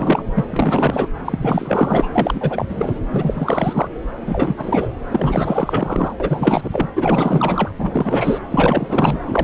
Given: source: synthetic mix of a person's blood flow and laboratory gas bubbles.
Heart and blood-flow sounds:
Doppler ultrasound of blood flow; subclavian vein
0.00-0.24 s: bubbles
0.35-0.46 s: bubbles
0.48-1.10 s: bubbles
1.24-2.08 s: bubbles
2.12-2.65 s: bubbles
2.69-3.00 s: bubbles
3.11-3.88 s: bubbles
4.20-4.88 s: bubbles
5.09-6.13 s: bubbles
6.20-6.88 s: bubbles
6.95-7.69 s: bubbles
7.79-8.39 s: bubbles
8.51-9.20 s: bubbles
9.26-9.44 s: bubbles
From the record:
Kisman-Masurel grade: 444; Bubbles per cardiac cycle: continuous sound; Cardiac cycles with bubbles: 100%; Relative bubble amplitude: maximal (0.775 to 0.999); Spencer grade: 4 (maximum detectable bubble signal sounding continuously throughout systole and diastole of every cardiac period, and overriding the amplitude of the normal cardiac signals); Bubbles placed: anywhere in the cardiac cycle

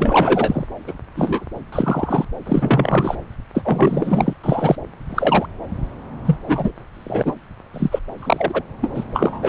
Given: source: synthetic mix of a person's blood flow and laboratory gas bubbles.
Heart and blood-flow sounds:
Doppler ultrasound of blood flow; subclavian vein
0.00-0.67 s: bubbles
0.86-0.93 s: bubbles
1.15-1.46 s: bubbles
1.72-2.25 s: bubbles
2.46-3.15 s: bubbles
3.54-4.33 s: bubbles
4.44-4.76 s: bubbles
5.08-5.47 s: bubbles
6.25-6.36 s: bubbles
6.48-6.72 s: bubbles
6.93-7.35 s: bubbles
7.73-8.00 s: bubbles
8.19-8.63 s: bubbles
8.81-8.91 s: bubbles
8.94-9.05 s: bubbles
9.12-9.49 s: bubbles
From the record:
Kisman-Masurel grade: 243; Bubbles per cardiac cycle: several, 3 to 8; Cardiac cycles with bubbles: 100%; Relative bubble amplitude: loud (0.450 to 0.775); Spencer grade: 3 (all of the cardiac periods contain showers or single bubble signals, but not dominating or overriding the cardiac motion signals); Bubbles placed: anywhere in the cardiac cycle

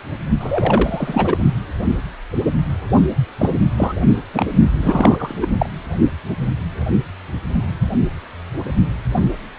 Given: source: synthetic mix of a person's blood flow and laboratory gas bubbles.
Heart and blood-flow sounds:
Doppler ultrasound of blood flow; precordium
0.40-1.43 s: bubbles
3.38-3.51 s: bubbles
3.77-3.93 s: bubbles
4.34-4.50 s: bubbles
4.81-5.34 s: bubbles
5.41-5.47 s: bubbles
5.59-5.70 s: bubbles
From the record:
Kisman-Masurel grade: 233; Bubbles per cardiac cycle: several, 3 to 8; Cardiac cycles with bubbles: 50 to 99%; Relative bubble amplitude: loud (0.450 to 0.775); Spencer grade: 3 (all of the cardiac periods contain showers or single bubble signals, but not dominating or overriding the cardiac motion signals); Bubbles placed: only in the low amplitude regions of the cardiac cycle

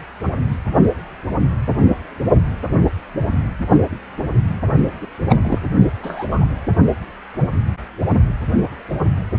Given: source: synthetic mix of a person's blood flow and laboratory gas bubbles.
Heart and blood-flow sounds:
Doppler ultrasound of blood flow; precordium
5.01-5.07 s: bubbles
5.29-5.37 s: bubbles
5.44-5.58 s: bubbles
6.03-6.26 s: bubbles
6.30-6.46 s: bubbles
From the record:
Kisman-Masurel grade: 222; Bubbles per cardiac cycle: several, 3 to 8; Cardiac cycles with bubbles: 10 to 50%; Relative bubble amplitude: moderate (0.250 to 0.450); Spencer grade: 2 (many but less than half of the cardiac periods contain bubble signals, singularly or in groups); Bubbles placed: only in the low amplitude regions of the cardiac cycle

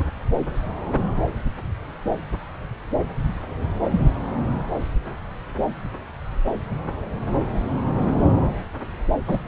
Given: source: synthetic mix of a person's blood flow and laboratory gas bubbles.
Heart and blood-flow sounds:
Doppler ultrasound of blood flow; subclavian vein
9.27-9.38 s: bubbles
From the record:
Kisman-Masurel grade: 113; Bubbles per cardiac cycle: 1 to 2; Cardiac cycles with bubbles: 1 to 10%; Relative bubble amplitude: loud (0.450 to 0.775); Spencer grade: 1 (occasional bubble signal discernible with the cardiac motion signal, with majority of cardiac periods free of bubbles); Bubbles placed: anywhere in the cardiac cycle

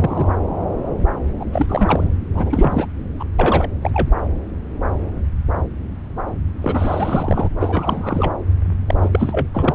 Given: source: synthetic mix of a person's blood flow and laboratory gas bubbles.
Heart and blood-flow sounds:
Doppler ultrasound of blood flow; subclavian vein
0.00-0.27 s: bubbles
1.40-1.45 s: bubbles
1.52-2.13 s: bubbles
2.34-2.88 s: bubbles
3.19-3.24 s: bubbles
3.38-3.69 s: bubbles
3.81-3.90 s: bubbles
3.94-4.08 s: bubbles
6.60-7.49 s: bubbles
7.60-8.34 s: bubbles
8.87-8.97 s: bubbles
9.01-9.47 s: bubbles
9.53-9.74 s: bubbles
From the record:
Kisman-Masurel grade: 332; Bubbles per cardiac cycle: rolling drumbeat, 9 or more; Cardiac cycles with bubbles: 50 to 99%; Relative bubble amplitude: moderate (0.250 to 0.450); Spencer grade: 3 (all of the cardiac periods contain showers or single bubble signals, but not dominating or overriding the cardiac motion signals); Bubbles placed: anywhere in the cardiac cycle

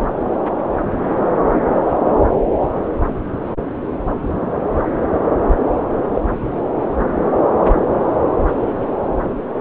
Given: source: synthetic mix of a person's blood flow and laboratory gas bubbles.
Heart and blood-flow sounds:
Doppler ultrasound of blood flow; subclavian vein
6.14-6.21 s: bubbles
From the record:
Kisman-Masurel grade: 112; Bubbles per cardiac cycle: 1 to 2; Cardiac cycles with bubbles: 1 to 10%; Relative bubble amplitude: moderate (0.250 to 0.450); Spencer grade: 1 (occasional bubble signal discernible with the cardiac motion signal, with majority of cardiac periods free of bubbles); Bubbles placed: anywhere in the cardiac cycle

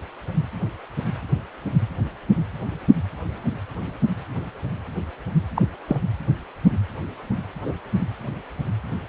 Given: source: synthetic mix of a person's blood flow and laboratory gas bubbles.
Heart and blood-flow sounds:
Doppler ultrasound of blood flow; precordium
5.55-5.62 s: bubbles
5.88-6.00 s: bubbles
7.64-7.75 s: bubbles
From the record:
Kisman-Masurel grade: 112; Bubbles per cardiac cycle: 1 to 2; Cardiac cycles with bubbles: 1 to 10%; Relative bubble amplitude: moderate (0.250 to 0.450); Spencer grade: 1 (occasional bubble signal discernible with the cardiac motion signal, with majority of cardiac periods free of bubbles); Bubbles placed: anywhere in the cardiac cycle

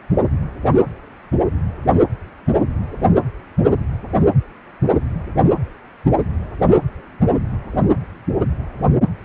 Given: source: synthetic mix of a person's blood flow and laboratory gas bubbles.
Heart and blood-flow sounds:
Doppler ultrasound of blood flow; precordium
no bubbles
From the record:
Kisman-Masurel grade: 000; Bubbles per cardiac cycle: 0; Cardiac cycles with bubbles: 0%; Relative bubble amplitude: no bubbles discernible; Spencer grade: 0 (complete lack of bubble signals)

